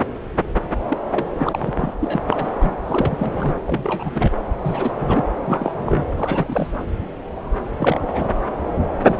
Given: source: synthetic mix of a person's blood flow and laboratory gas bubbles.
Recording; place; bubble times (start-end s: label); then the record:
Doppler ultrasound of blood flow; subclavian vein
0.88-0.98 s: bubbles
1.06-1.25 s: bubbles
1.40-1.93 s: bubbles
2.00-2.22 s: bubbles
2.29-2.50 s: bubbles
2.59-2.71 s: bubbles
2.84-3.16 s: bubbles
3.19-3.56 s: bubbles
3.66-4.31 s: bubbles
4.63-4.92 s: bubbles
5.00-5.25 s: bubbles
5.44-5.75 s: bubbles
5.77-6.05 s: bubbles
6.17-6.77 s: bubbles
7.79-8.08 s: bubbles
8.12-8.30 s: bubbles
8.74-8.87 s: bubbles
9.06-9.17 s: bubbles
From the record:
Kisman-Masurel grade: 332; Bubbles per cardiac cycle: rolling drumbeat, 9 or more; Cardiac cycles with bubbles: 50 to 99%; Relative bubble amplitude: moderate (0.250 to 0.450); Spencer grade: 3 (all of the cardiac periods contain showers or single bubble signals, but not dominating or overriding the cardiac motion signals); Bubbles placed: anywhere in the cardiac cycle